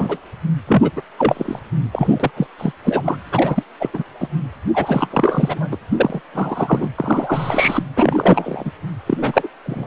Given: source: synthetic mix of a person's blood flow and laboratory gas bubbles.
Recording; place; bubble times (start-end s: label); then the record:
Doppler ultrasound of blood flow; precordium
0.00-0.18 s: bubbles
0.67-0.91 s: bubbles
0.96-1.01 s: bubbles
1.18-1.59 s: bubbles
1.92-2.31 s: bubbles
2.37-2.47 s: bubbles
2.58-2.73 s: bubbles
2.85-3.17 s: bubbles
3.31-3.63 s: bubbles
3.80-3.90 s: bubbles
3.94-4.04 s: bubbles
4.20-4.28 s: bubbles
4.74-5.77 s: bubbles
5.89-6.21 s: bubbles
6.33-6.90 s: bubbles
6.98-7.83 s: bubbles
7.96-8.71 s: bubbles
9.06-9.18 s: bubbles
9.21-9.48 s: bubbles
9.63-9.87 s: bubbles
From the record:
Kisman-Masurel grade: 343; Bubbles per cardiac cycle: rolling drumbeat, 9 or more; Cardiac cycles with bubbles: 100%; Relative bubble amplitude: loud (0.450 to 0.775); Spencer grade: 3 (all of the cardiac periods contain showers or single bubble signals, but not dominating or overriding the cardiac motion signals); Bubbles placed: anywhere in the cardiac cycle